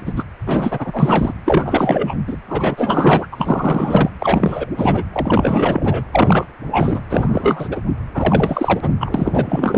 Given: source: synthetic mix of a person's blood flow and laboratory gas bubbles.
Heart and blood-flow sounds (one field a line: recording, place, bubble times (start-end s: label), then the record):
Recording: Doppler ultrasound of blood flow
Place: precordium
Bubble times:
0.00-0.13 s: bubbles
0.16-0.24 s: bubbles
0.45-1.33 s: bubbles
1.45-2.15 s: bubbles
2.27-2.38 s: bubbles
2.48-3.28 s: bubbles
3.31-4.11 s: bubbles
4.20-4.69 s: bubbles
4.76-5.04 s: bubbles
5.12-6.04 s: bubbles
6.12-6.45 s: bubbles
6.71-7.02 s: bubbles
7.10-7.69 s: bubbles
7.71-7.81 s: bubbles
8.14-8.95 s: bubbles
9.00-9.78 s: bubbles
From the record:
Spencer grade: 4 (maximum detectable bubble signal sounding continuously throughout systole and diastole of every cardiac period, and overriding the amplitude of the normal cardiac signals)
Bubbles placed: anywhere in the cardiac cycle